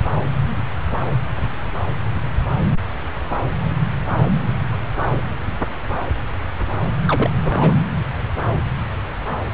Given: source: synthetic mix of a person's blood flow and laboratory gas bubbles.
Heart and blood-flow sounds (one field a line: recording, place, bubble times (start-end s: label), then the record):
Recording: Doppler ultrasound of blood flow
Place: subclavian vein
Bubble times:
7.05-7.30 s: bubbles
7.42-7.75 s: bubbles
From the record:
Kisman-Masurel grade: 212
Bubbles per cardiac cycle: several, 3 to 8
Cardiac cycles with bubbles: 1 to 10%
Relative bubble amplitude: moderate (0.250 to 0.450)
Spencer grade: 1 (occasional bubble signal discernible with the cardiac motion signal, with majority of cardiac periods free of bubbles)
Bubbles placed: anywhere in the cardiac cycle